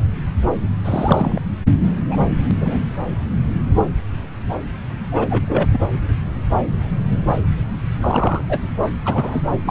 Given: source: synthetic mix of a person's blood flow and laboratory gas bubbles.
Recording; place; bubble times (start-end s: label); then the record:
Doppler ultrasound of blood flow; subclavian vein
0.00-0.04 s: bubbles
0.84-1.40 s: bubbles
2.08-2.20 s: bubbles
2.51-2.56 s: bubbles
2.60-2.84 s: bubbles
5.12-5.27 s: bubbles
5.30-5.67 s: bubbles
5.71-5.79 s: bubbles
8.00-8.42 s: bubbles
8.49-8.60 s: bubbles
9.05-9.42 s: bubbles
9.64-9.70 s: bubbles
From the record:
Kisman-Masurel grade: 232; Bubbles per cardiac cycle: several, 3 to 8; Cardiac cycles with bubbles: 50 to 99%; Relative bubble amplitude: moderate (0.250 to 0.450); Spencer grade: 3 (all of the cardiac periods contain showers or single bubble signals, but not dominating or overriding the cardiac motion signals); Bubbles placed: anywhere in the cardiac cycle